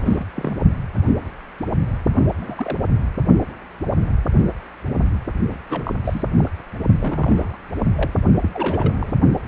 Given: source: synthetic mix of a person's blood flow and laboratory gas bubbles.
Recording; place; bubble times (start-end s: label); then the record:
Doppler ultrasound of blood flow; precordium
0.00-0.26 s: bubbles
0.35-0.56 s: bubbles
2.40-2.78 s: bubbles
5.50-5.58 s: bubbles
5.70-5.93 s: bubbles
6.04-6.24 s: bubbles
6.38-6.51 s: bubbles
7.00-7.57 s: bubbles
7.78-7.86 s: bubbles
7.95-8.11 s: bubbles
8.41-8.50 s: bubbles
8.53-9.14 s: bubbles
From the record:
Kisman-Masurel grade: 221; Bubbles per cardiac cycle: several, 3 to 8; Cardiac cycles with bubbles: 10 to 50%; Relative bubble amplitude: barely perceptible (0.100 to 0.250); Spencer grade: 2 (many but less than half of the cardiac periods contain bubble signals, singularly or in groups); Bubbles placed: only in the low amplitude regions of the cardiac cycle